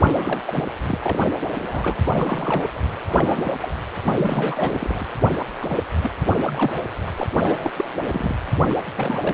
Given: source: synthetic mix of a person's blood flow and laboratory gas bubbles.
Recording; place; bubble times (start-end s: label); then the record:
Doppler ultrasound of blood flow; precordium
0.00-0.66 s: bubbles
0.81-1.20 s: bubbles
1.51-1.97 s: bubbles
2.03-2.10 s: bubbles
2.14-2.69 s: bubbles
2.75-2.80 s: bubbles
3.07-3.72 s: bubbles
4.04-5.06 s: bubbles
5.62-5.79 s: bubbles
6.02-6.11 s: bubbles
6.22-6.75 s: bubbles
7.06-7.12 s: bubbles
7.17-7.23 s: bubbles
7.43-7.71 s: bubbles
7.77-7.85 s: bubbles
8.05-8.36 s: bubbles
8.68-8.77 s: bubbles
8.96-9.34 s: bubbles
From the record:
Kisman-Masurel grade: 342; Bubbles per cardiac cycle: rolling drumbeat, 9 or more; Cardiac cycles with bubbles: 100%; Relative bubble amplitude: moderate (0.250 to 0.450); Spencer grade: 3 (all of the cardiac periods contain showers or single bubble signals, but not dominating or overriding the cardiac motion signals); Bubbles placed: anywhere in the cardiac cycle